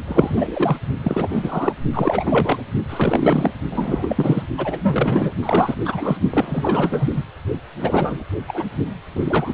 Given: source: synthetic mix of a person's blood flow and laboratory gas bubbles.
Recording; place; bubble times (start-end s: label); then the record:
Doppler ultrasound of blood flow; precordium
0.07-0.77 s: bubbles
1.03-1.73 s: bubbles
1.94-2.62 s: bubbles
2.89-3.51 s: bubbles
3.70-4.43 s: bubbles
4.57-5.32 s: bubbles
5.42-5.75 s: bubbles
5.85-6.17 s: bubbles
6.30-7.22 s: bubbles
7.79-8.24 s: bubbles
8.47-8.65 s: bubbles
9.15-9.54 s: bubbles
From the record:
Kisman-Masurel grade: 333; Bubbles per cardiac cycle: rolling drumbeat, 9 or more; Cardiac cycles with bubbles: 50 to 99%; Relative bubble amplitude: loud (0.450 to 0.775); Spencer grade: 3 (all of the cardiac periods contain showers or single bubble signals, but not dominating or overriding the cardiac motion signals); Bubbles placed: only in the low amplitude regions of the cardiac cycle